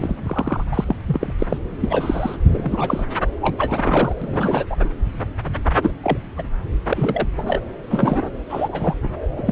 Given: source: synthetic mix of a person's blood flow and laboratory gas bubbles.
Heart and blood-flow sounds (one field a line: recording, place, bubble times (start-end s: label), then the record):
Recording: Doppler ultrasound of blood flow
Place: subclavian vein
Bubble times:
0.00-0.16 s: bubbles
0.23-0.64 s: bubbles
0.71-0.95 s: bubbles
1.06-1.32 s: bubbles
1.39-1.47 s: bubbles
1.49-1.58 s: bubbles
1.80-2.37 s: bubbles
2.48-3.06 s: bubbles
3.41-4.13 s: bubbles
4.22-4.64 s: bubbles
4.70-4.77 s: bubbles
4.84-4.89 s: bubbles
5.82-5.91 s: bubbles
6.03-6.19 s: bubbles
6.37-6.43 s: bubbles
6.89-7.27 s: bubbles
7.36-7.61 s: bubbles
7.90-8.30 s: bubbles
8.49-8.96 s: bubbles
9.03-9.09 s: bubbles
9.37-9.42 s: bubbles
9.46-9.52 s: bubbles
From the record:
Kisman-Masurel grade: 242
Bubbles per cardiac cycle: several, 3 to 8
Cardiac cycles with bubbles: 100%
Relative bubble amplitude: moderate (0.250 to 0.450)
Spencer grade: 3 (all of the cardiac periods contain showers or single bubble signals, but not dominating or overriding the cardiac motion signals)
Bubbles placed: anywhere in the cardiac cycle